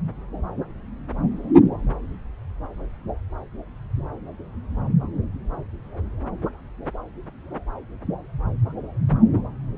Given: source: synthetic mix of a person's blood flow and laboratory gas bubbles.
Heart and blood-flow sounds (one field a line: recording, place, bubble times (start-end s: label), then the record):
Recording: Doppler ultrasound of blood flow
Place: subclavian vein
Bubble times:
no bubbles
From the record:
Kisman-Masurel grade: 000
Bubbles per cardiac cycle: 0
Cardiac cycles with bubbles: 0%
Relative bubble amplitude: no bubbles discernible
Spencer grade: 0 (complete lack of bubble signals)